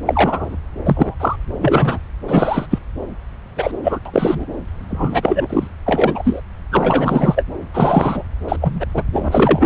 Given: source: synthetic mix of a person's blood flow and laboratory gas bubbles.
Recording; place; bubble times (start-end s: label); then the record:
Doppler ultrasound of blood flow; subclavian vein
0.06-0.56 s: bubbles
0.85-1.15 s: bubbles
1.19-1.36 s: bubbles
1.59-1.98 s: bubbles
2.27-2.66 s: bubbles
2.70-2.79 s: bubbles
3.56-3.71 s: bubbles
3.83-3.99 s: bubbles
4.05-4.46 s: bubbles
4.89-5.67 s: bubbles
5.86-6.42 s: bubbles
6.71-7.45 s: bubbles
7.74-8.23 s: bubbles
8.48-8.56 s: bubbles
8.61-8.86 s: bubbles
8.94-9.03 s: bubbles
9.13-9.66 s: bubbles
From the record:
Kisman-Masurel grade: 243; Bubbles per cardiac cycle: several, 3 to 8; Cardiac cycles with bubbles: 100%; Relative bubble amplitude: loud (0.450 to 0.775); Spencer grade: 3 (all of the cardiac periods contain showers or single bubble signals, but not dominating or overriding the cardiac motion signals); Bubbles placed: anywhere in the cardiac cycle